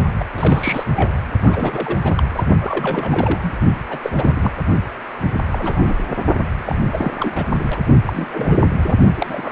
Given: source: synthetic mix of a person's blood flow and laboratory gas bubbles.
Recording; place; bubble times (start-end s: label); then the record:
Doppler ultrasound of blood flow; precordium
0.19-0.24 s: bubbles
0.33-0.83 s: bubbles
0.96-1.16 s: bubbles
1.41-1.98 s: bubbles
2.03-2.15 s: bubbles
2.17-2.23 s: bubbles
2.29-2.44 s: bubbles
2.59-3.53 s: bubbles
3.90-3.98 s: bubbles
4.03-4.11 s: bubbles
4.16-4.52 s: bubbles
5.22-5.30 s: bubbles
5.52-5.95 s: bubbles
6.08-6.17 s: bubbles
6.56-6.79 s: bubbles
6.93-7.12 s: bubbles
7.17-7.44 s: bubbles
7.58-7.80 s: bubbles
8.07-8.28 s: bubbles
8.31-8.70 s: bubbles
8.78-8.94 s: bubbles
9.15-9.51 s: bubbles
From the record:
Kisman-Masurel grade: 342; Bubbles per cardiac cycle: rolling drumbeat, 9 or more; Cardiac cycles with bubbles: 100%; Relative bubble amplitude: moderate (0.250 to 0.450); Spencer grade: 3 (all of the cardiac periods contain showers or single bubble signals, but not dominating or overriding the cardiac motion signals); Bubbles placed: only in the low amplitude regions of the cardiac cycle